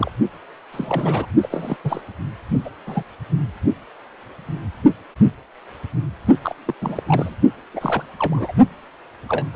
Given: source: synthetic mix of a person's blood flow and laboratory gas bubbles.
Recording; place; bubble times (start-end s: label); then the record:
Doppler ultrasound of blood flow; precordium
0.00-0.11 s: bubbles
0.72-1.26 s: bubbles
1.42-1.77 s: bubbles
1.84-2.01 s: bubbles
2.65-2.69 s: bubbles
2.86-3.02 s: bubbles
6.42-6.55 s: bubbles
6.66-6.74 s: bubbles
6.82-7.03 s: bubbles
7.07-7.36 s: bubbles
7.74-8.04 s: bubbles
8.19-8.52 s: bubbles
9.28-9.46 s: bubbles
9.53-9.56 s: bubbles
From the record:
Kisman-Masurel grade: 232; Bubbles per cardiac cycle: several, 3 to 8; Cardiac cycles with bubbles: 50 to 99%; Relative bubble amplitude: moderate (0.250 to 0.450); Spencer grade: 3 (all of the cardiac periods contain showers or single bubble signals, but not dominating or overriding the cardiac motion signals); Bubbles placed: only in the low amplitude regions of the cardiac cycle